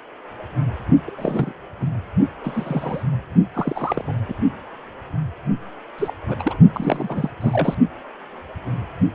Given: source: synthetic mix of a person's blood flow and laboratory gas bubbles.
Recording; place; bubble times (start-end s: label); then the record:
Doppler ultrasound of blood flow; precordium
1.06-1.11 s: bubbles
1.17-1.52 s: bubbles
1.80-1.87 s: bubbles
2.44-3.03 s: bubbles
3.54-4.19 s: bubbles
4.27-4.34 s: bubbles
5.98-6.12 s: bubbles
6.28-6.36 s: bubbles
6.39-6.57 s: bubbles
6.72-7.30 s: bubbles
7.40-7.75 s: bubbles
From the record:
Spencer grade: 2 (many but less than half of the cardiac periods contain bubble signals, singularly or in groups); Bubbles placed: only in the low amplitude regions of the cardiac cycle